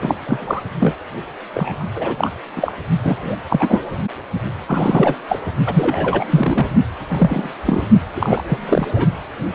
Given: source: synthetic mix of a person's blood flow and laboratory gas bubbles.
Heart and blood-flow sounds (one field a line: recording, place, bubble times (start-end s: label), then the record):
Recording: Doppler ultrasound of blood flow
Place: precordium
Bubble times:
0.00-0.15 s: bubbles
0.27-0.62 s: bubbles
0.80-0.95 s: bubbles
1.54-1.85 s: bubbles
1.95-2.32 s: bubbles
2.56-2.73 s: bubbles
3.03-3.37 s: bubbles
3.49-3.81 s: bubbles
4.67-5.16 s: bubbles
5.28-5.39 s: bubbles
5.66-6.25 s: bubbles
6.31-6.67 s: bubbles
7.09-7.50 s: bubbles
7.65-7.87 s: bubbles
8.15-8.43 s: bubbles
8.46-8.59 s: bubbles
8.68-8.88 s: bubbles
8.95-9.08 s: bubbles
From the record:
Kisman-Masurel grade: 243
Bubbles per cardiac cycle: several, 3 to 8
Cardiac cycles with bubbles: 100%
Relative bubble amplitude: loud (0.450 to 0.775)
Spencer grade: 3 (all of the cardiac periods contain showers or single bubble signals, but not dominating or overriding the cardiac motion signals)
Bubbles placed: only in the low amplitude regions of the cardiac cycle